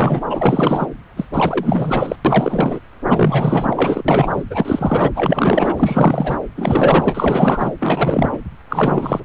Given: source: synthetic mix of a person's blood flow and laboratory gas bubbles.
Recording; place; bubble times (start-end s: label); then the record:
Doppler ultrasound of blood flow; subclavian vein
0.00-0.21 s: bubbles
0.30-0.86 s: bubbles
1.16-1.27 s: bubbles
1.33-2.16 s: bubbles
2.25-2.79 s: bubbles
3.05-4.04 s: bubbles
4.08-4.44 s: bubbles
4.50-5.11 s: bubbles
5.15-5.75 s: bubbles
5.77-6.38 s: bubbles
6.55-7.72 s: bubbles
7.79-8.40 s: bubbles
8.69-9.20 s: bubbles
From the record:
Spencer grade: 4 (maximum detectable bubble signal sounding continuously throughout systole and diastole of every cardiac period, and overriding the amplitude of the normal cardiac signals); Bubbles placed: anywhere in the cardiac cycle